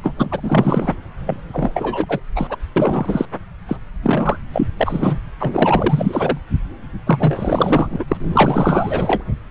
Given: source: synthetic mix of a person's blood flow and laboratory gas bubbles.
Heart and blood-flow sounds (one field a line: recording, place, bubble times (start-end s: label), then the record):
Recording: Doppler ultrasound of blood flow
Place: subclavian vein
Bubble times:
0.03-0.15 s: bubbles
0.17-0.94 s: bubbles
1.25-1.37 s: bubbles
1.50-2.20 s: bubbles
2.35-2.56 s: bubbles
2.76-3.25 s: bubbles
3.68-3.76 s: bubbles
4.02-4.37 s: bubbles
4.52-4.67 s: bubbles
4.77-5.21 s: bubbles
5.39-6.38 s: bubbles
7.06-8.04 s: bubbles
8.08-9.24 s: bubbles
From the record:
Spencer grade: 4 (maximum detectable bubble signal sounding continuously throughout systole and diastole of every cardiac period, and overriding the amplitude of the normal cardiac signals)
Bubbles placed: anywhere in the cardiac cycle